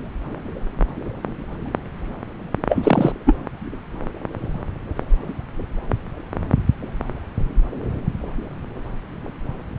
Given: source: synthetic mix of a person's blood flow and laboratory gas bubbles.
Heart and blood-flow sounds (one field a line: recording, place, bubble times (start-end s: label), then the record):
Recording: Doppler ultrasound of blood flow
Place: subclavian vein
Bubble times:
2.69-3.12 s: bubbles
3.26-3.34 s: bubbles
From the record:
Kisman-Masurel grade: 213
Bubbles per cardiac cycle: several, 3 to 8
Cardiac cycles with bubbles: 1 to 10%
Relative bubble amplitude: loud (0.450 to 0.775)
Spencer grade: 1 (occasional bubble signal discernible with the cardiac motion signal, with majority of cardiac periods free of bubbles)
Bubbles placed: anywhere in the cardiac cycle